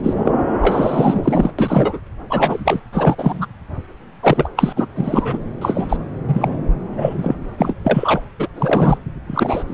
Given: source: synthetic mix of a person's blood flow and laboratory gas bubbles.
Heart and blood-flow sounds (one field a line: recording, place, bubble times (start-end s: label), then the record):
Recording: Doppler ultrasound of blood flow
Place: subclavian vein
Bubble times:
0.00-0.13 s: bubbles
0.24-0.32 s: bubbles
0.60-1.51 s: bubbles
1.58-2.00 s: bubbles
2.29-2.80 s: bubbles
2.92-3.15 s: bubbles
3.18-3.46 s: bubbles
4.22-4.50 s: bubbles
4.56-4.72 s: bubbles
4.76-4.86 s: bubbles
4.95-5.42 s: bubbles
5.61-5.96 s: bubbles
6.27-6.57 s: bubbles
6.92-7.35 s: bubbles
7.57-7.74 s: bubbles
7.83-8.21 s: bubbles
8.38-8.48 s: bubbles
8.55-8.97 s: bubbles
9.27-9.63 s: bubbles
9.68-9.74 s: bubbles
From the record:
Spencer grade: 3 (all of the cardiac periods contain showers or single bubble signals, but not dominating or overriding the cardiac motion signals)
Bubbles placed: anywhere in the cardiac cycle